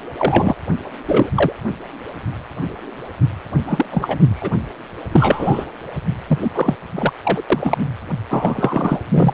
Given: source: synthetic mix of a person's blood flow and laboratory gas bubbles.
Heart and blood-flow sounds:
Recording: Doppler ultrasound of blood flow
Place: precordium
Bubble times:
0.17-0.55 s: bubbles
1.08-1.29 s: bubbles
1.34-1.52 s: bubbles
3.67-3.86 s: bubbles
3.91-4.18 s: bubbles
4.36-4.58 s: bubbles
5.12-5.65 s: bubbles
6.27-6.38 s: bubbles
6.42-6.51 s: bubbles
6.54-6.75 s: bubbles
6.95-7.13 s: bubbles
7.23-7.42 s: bubbles
7.50-7.78 s: bubbles
8.29-9.00 s: bubbles
9.11-9.34 s: bubbles
From the record:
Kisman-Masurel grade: 233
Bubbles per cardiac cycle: several, 3 to 8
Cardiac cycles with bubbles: 50 to 99%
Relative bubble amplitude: loud (0.450 to 0.775)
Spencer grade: 3 (all of the cardiac periods contain showers or single bubble signals, but not dominating or overriding the cardiac motion signals)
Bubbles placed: anywhere in the cardiac cycle

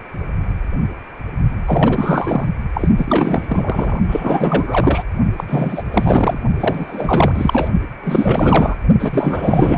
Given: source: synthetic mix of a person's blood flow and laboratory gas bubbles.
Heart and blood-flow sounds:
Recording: Doppler ultrasound of blood flow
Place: precordium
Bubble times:
1.65-2.46 s: bubbles
2.73-2.89 s: bubbles
2.98-4.00 s: bubbles
4.08-5.03 s: bubbles
5.37-5.44 s: bubbles
5.46-5.83 s: bubbles
5.92-6.38 s: bubbles
6.58-7.68 s: bubbles
8.04-8.76 s: bubbles
8.99-9.78 s: bubbles
From the record:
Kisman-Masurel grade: 444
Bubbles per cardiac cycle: continuous sound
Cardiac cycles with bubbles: 100%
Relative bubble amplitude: maximal (0.775 to 0.999)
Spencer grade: 4 (maximum detectable bubble signal sounding continuously throughout systole and diastole of every cardiac period, and overriding the amplitude of the normal cardiac signals)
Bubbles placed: only in the low amplitude regions of the cardiac cycle

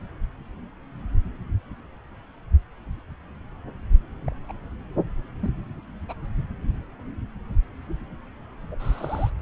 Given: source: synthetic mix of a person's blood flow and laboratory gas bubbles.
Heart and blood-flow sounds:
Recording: Doppler ultrasound of blood flow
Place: subclavian vein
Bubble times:
4.26-4.29 s: bubbles
4.48-4.53 s: bubbles
5.42-5.53 s: bubbles
6.08-6.14 s: bubbles
8.71-8.75 s: bubbles
8.79-9.30 s: bubbles
From the record:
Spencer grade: 2 (many but less than half of the cardiac periods contain bubble signals, singularly or in groups)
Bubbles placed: anywhere in the cardiac cycle

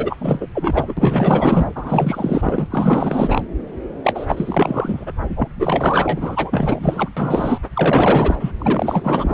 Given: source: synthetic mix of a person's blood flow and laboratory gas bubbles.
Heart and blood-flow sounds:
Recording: Doppler ultrasound of blood flow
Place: subclavian vein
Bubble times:
0.00-0.47 s: bubbles
0.54-0.94 s: bubbles
0.97-1.67 s: bubbles
1.75-2.67 s: bubbles
2.70-3.45 s: bubbles
4.03-5.13 s: bubbles
5.36-5.49 s: bubbles
5.59-7.09 s: bubbles
7.17-7.60 s: bubbles
7.74-8.52 s: bubbles
8.60-9.34 s: bubbles
From the record:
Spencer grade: 4 (maximum detectable bubble signal sounding continuously throughout systole and diastole of every cardiac period, and overriding the amplitude of the normal cardiac signals)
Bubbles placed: anywhere in the cardiac cycle

